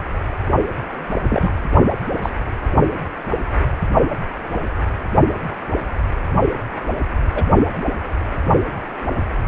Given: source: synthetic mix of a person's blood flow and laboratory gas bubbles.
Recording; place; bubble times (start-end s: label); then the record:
Doppler ultrasound of blood flow; precordium
1.29-1.51 s: bubbles
2.22-2.29 s: bubbles
7.35-7.44 s: bubbles
From the record:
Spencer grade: 2 (many but less than half of the cardiac periods contain bubble signals, singularly or in groups); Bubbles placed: only in the low amplitude regions of the cardiac cycle